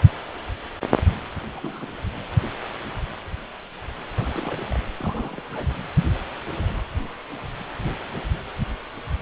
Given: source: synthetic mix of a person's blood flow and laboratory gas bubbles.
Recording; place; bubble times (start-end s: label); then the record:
Doppler ultrasound of blood flow; precordium
1.47-1.50 s: bubbles
1.54-1.90 s: bubbles
4.16-4.80 s: bubbles
4.99-5.42 s: bubbles
5.52-5.67 s: bubbles
From the record:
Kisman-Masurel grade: 221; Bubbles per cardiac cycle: several, 3 to 8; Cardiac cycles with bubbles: 10 to 50%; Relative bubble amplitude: barely perceptible (0.100 to 0.250); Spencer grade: 2 (many but less than half of the cardiac periods contain bubble signals, singularly or in groups); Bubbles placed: anywhere in the cardiac cycle